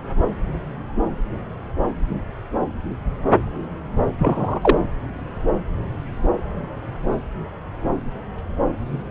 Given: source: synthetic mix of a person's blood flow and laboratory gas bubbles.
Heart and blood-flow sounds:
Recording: Doppler ultrasound of blood flow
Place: subclavian vein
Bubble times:
4.18-4.78 s: bubbles
From the record:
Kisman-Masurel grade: 113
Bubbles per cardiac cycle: 1 to 2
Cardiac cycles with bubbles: 1 to 10%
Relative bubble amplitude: loud (0.450 to 0.775)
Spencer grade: 1 (occasional bubble signal discernible with the cardiac motion signal, with majority of cardiac periods free of bubbles)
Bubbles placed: anywhere in the cardiac cycle

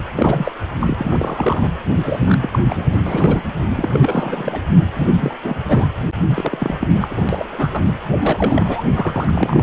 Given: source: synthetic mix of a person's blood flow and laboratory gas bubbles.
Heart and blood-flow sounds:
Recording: Doppler ultrasound of blood flow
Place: precordium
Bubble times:
0.15-0.52 s: bubbles
0.80-0.97 s: bubbles
0.99-1.70 s: bubbles
1.96-2.38 s: bubbles
2.41-2.50 s: bubbles
2.52-2.59 s: bubbles
2.69-2.87 s: bubbles
2.92-2.99 s: bubbles
3.06-3.42 s: bubbles
3.75-4.60 s: bubbles
4.96-5.08 s: bubbles
5.16-5.34 s: bubbles
5.43-5.56 s: bubbles
5.64-5.87 s: bubbles
6.29-6.75 s: bubbles
6.80-6.88 s: bubbles
6.91-7.08 s: bubbles
7.11-7.25 s: bubbles
7.29-7.81 s: bubbles
7.84-7.93 s: bubbles
8.19-8.83 s: bubbles
8.94-9.63 s: bubbles
From the record:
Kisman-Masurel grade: 342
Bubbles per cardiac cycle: rolling drumbeat, 9 or more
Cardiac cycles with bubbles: 100%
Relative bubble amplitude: moderate (0.250 to 0.450)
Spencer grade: 3 (all of the cardiac periods contain showers or single bubble signals, but not dominating or overriding the cardiac motion signals)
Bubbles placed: anywhere in the cardiac cycle

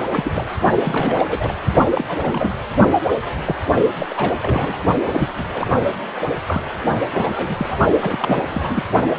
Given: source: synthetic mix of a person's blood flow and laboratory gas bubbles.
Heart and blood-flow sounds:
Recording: Doppler ultrasound of blood flow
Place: precordium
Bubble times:
0.12-0.47 s: bubbles
0.84-1.26 s: bubbles
1.28-1.55 s: bubbles
1.94-2.57 s: bubbles
3.45-3.55 s: bubbles
3.74-3.81 s: bubbles
3.99-4.06 s: bubbles
4.09-4.34 s: bubbles
4.41-4.78 s: bubbles
5.03-5.33 s: bubbles
5.37-5.43 s: bubbles
5.54-5.92 s: bubbles
6.47-6.62 s: bubbles
6.87-6.97 s: bubbles
7.12-7.79 s: bubbles
7.98-8.44 s: bubbles
8.54-8.83 s: bubbles
9.06-9.19 s: bubbles
From the record:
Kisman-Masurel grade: 342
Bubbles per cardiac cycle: rolling drumbeat, 9 or more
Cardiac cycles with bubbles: 100%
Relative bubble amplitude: moderate (0.250 to 0.450)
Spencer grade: 3 (all of the cardiac periods contain showers or single bubble signals, but not dominating or overriding the cardiac motion signals)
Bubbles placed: only in the low amplitude regions of the cardiac cycle

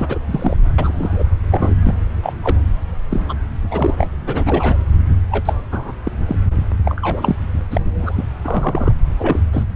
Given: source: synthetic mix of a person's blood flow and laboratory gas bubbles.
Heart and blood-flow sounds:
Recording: Doppler ultrasound of blood flow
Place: subclavian vein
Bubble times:
0.00-0.19 s: bubbles
0.32-0.56 s: bubbles
0.78-1.24 s: bubbles
1.51-1.75 s: bubbles
1.86-1.94 s: bubbles
2.22-2.33 s: bubbles
2.43-2.58 s: bubbles
3.10-3.35 s: bubbles
3.71-3.96 s: bubbles
3.98-4.09 s: bubbles
4.26-4.77 s: bubbles
5.31-5.54 s: bubbles
5.71-5.92 s: bubbles
6.04-6.11 s: bubbles
6.27-6.36 s: bubbles
6.85-7.35 s: bubbles
7.71-7.80 s: bubbles
7.83-8.24 s: bubbles
8.44-8.92 s: bubbles
9.19-9.40 s: bubbles
9.52-9.66 s: bubbles
From the record:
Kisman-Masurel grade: 242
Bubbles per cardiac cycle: several, 3 to 8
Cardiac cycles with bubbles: 100%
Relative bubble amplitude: moderate (0.250 to 0.450)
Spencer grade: 3 (all of the cardiac periods contain showers or single bubble signals, but not dominating or overriding the cardiac motion signals)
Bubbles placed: anywhere in the cardiac cycle

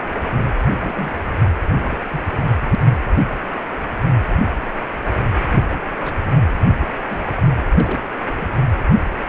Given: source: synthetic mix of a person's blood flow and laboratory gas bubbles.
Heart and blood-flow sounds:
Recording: Doppler ultrasound of blood flow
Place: precordium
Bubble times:
0.45-0.52 s: bubbles
0.56-0.69 s: bubbles
0.77-1.13 s: bubbles
1.81-1.98 s: bubbles
2.10-2.22 s: bubbles
2.37-2.55 s: bubbles
5.51-5.64 s: bubbles
5.66-5.79 s: bubbles
6.04-6.22 s: bubbles
6.60-6.65 s: bubbles
6.78-6.88 s: bubbles
7.01-7.31 s: bubbles
7.35-7.43 s: bubbles
7.66-8.00 s: bubbles
8.40-8.50 s: bubbles
From the record:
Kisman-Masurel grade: 221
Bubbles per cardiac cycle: several, 3 to 8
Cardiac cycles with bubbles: 10 to 50%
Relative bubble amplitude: barely perceptible (0.100 to 0.250)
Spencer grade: 2 (many but less than half of the cardiac periods contain bubble signals, singularly or in groups)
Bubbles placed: anywhere in the cardiac cycle

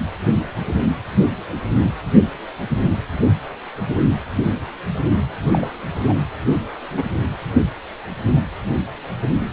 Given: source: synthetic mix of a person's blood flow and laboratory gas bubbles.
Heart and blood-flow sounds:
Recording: Doppler ultrasound of blood flow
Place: precordium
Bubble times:
5.52-5.72 s: bubbles
6.06-6.14 s: bubbles
6.53-6.60 s: bubbles
6.93-7.03 s: bubbles
From the record:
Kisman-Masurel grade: 122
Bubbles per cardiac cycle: 1 to 2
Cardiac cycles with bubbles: 10 to 50%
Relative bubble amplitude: moderate (0.250 to 0.450)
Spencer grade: 2 (many but less than half of the cardiac periods contain bubble signals, singularly or in groups)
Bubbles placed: anywhere in the cardiac cycle

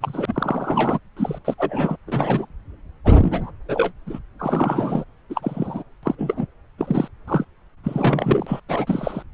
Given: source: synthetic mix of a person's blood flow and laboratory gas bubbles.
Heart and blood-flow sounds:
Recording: Doppler ultrasound of blood flow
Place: subclavian vein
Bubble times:
0.01-0.99 s: bubbles
1.17-1.39 s: bubbles
1.45-1.55 s: bubbles
1.58-1.97 s: bubbles
2.07-2.46 s: bubbles
3.04-3.51 s: bubbles
3.69-3.91 s: bubbles
4.06-4.19 s: bubbles
4.39-5.04 s: bubbles
5.29-5.83 s: bubbles
6.03-6.15 s: bubbles
6.18-6.46 s: bubbles
6.78-7.08 s: bubbles
7.28-7.45 s: bubbles
7.84-8.60 s: bubbles
8.69-9.22 s: bubbles
From the record:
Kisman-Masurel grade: 232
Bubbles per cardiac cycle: several, 3 to 8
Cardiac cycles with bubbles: 50 to 99%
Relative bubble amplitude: moderate (0.250 to 0.450)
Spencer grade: 3 (all of the cardiac periods contain showers or single bubble signals, but not dominating or overriding the cardiac motion signals)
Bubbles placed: anywhere in the cardiac cycle

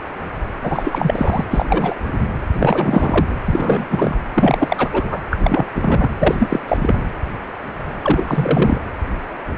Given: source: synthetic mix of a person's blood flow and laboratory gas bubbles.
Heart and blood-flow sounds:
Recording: Doppler ultrasound of blood flow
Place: precordium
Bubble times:
0.63-1.44 s: bubbles
1.50-1.66 s: bubbles
1.70-1.95 s: bubbles
2.06-2.22 s: bubbles
2.52-3.26 s: bubbles
3.45-4.17 s: bubbles
4.34-4.89 s: bubbles
4.92-5.20 s: bubbles
5.30-5.67 s: bubbles
5.75-6.11 s: bubbles
6.20-6.35 s: bubbles
6.39-6.59 s: bubbles
6.68-6.97 s: bubbles
8.02-8.78 s: bubbles
From the record:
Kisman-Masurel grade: 333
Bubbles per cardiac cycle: rolling drumbeat, 9 or more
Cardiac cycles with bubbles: 50 to 99%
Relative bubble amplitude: loud (0.450 to 0.775)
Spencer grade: 3 (all of the cardiac periods contain showers or single bubble signals, but not dominating or overriding the cardiac motion signals)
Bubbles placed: anywhere in the cardiac cycle

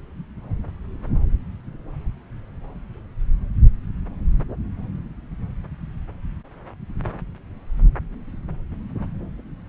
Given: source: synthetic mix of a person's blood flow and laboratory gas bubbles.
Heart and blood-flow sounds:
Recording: Doppler ultrasound of blood flow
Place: subclavian vein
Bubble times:
no bubbles
From the record:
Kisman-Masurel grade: 000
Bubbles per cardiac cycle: 0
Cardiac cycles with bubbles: 0%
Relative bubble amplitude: no bubbles discernible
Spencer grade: 0 (complete lack of bubble signals)

